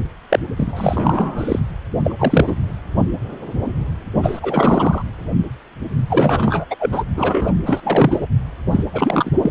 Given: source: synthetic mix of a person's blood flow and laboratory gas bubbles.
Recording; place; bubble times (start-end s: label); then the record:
Doppler ultrasound of blood flow; precordium
0.29-0.39 s: bubbles
0.57-1.59 s: bubbles
2.04-2.74 s: bubbles
4.23-5.03 s: bubbles
6.08-6.65 s: bubbles
6.70-6.75 s: bubbles
6.79-7.04 s: bubbles
7.16-7.52 s: bubbles
7.66-8.27 s: bubbles
8.71-8.83 s: bubbles
8.93-9.30 s: bubbles
9.41-9.51 s: bubbles
From the record:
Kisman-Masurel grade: 333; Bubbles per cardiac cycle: rolling drumbeat, 9 or more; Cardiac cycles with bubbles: 50 to 99%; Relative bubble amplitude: loud (0.450 to 0.775); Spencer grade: 3 (all of the cardiac periods contain showers or single bubble signals, but not dominating or overriding the cardiac motion signals); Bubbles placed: only in the low amplitude regions of the cardiac cycle